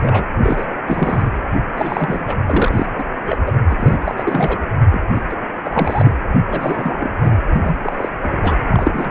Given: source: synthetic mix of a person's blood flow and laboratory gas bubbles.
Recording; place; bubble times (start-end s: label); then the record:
Doppler ultrasound of blood flow; precordium
0.00-0.27 s: bubbles
0.42-0.66 s: bubbles
0.70-0.75 s: bubbles
0.88-1.30 s: bubbles
1.74-2.37 s: bubbles
2.44-2.86 s: bubbles
2.97-3.04 s: bubbles
3.25-3.37 s: bubbles
3.46-3.55 s: bubbles
3.68-4.58 s: bubbles
4.92-5.00 s: bubbles
5.14-5.22 s: bubbles
5.29-5.36 s: bubbles
5.64-6.12 s: bubbles
6.50-7.11 s: bubbles
7.14-7.36 s: bubbles
7.50-7.79 s: bubbles
7.83-8.57 s: bubbles
8.71-9.11 s: bubbles
From the record:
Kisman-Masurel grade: 342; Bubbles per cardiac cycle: rolling drumbeat, 9 or more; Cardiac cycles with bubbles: 100%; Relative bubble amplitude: moderate (0.250 to 0.450); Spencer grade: 3 (all of the cardiac periods contain showers or single bubble signals, but not dominating or overriding the cardiac motion signals); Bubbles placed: anywhere in the cardiac cycle